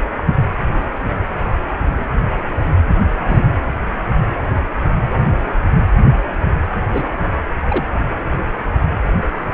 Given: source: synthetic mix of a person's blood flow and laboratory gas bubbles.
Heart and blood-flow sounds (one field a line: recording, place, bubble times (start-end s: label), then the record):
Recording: Doppler ultrasound of blood flow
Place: precordium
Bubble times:
0.16-0.24 s: bubbles
3.18-3.53 s: bubbles
6.82-7.09 s: bubbles
7.68-7.85 s: bubbles
9.45-9.54 s: bubbles
From the record:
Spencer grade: 2 (many but less than half of the cardiac periods contain bubble signals, singularly or in groups)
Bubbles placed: anywhere in the cardiac cycle